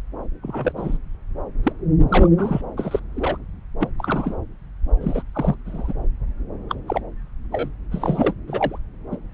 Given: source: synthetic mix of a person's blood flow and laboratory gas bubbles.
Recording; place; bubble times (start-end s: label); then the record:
Doppler ultrasound of blood flow; subclavian vein
0.42-0.72 s: bubbles
0.76-0.98 s: bubbles
1.63-1.73 s: bubbles
2.09-2.29 s: bubbles
2.38-2.61 s: bubbles
2.77-3.00 s: bubbles
3.15-3.37 s: bubbles
3.79-3.90 s: bubbles
3.98-4.36 s: bubbles
5.00-5.23 s: bubbles
5.33-5.55 s: bubbles
5.65-5.93 s: bubbles
6.69-6.75 s: bubbles
6.88-7.01 s: bubbles
7.52-7.70 s: bubbles
7.91-8.35 s: bubbles
8.47-8.79 s: bubbles
9.11-9.17 s: bubbles
From the record:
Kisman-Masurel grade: 242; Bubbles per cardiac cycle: several, 3 to 8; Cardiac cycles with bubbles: 100%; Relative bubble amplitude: moderate (0.250 to 0.450); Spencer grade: 3 (all of the cardiac periods contain showers or single bubble signals, but not dominating or overriding the cardiac motion signals); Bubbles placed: anywhere in the cardiac cycle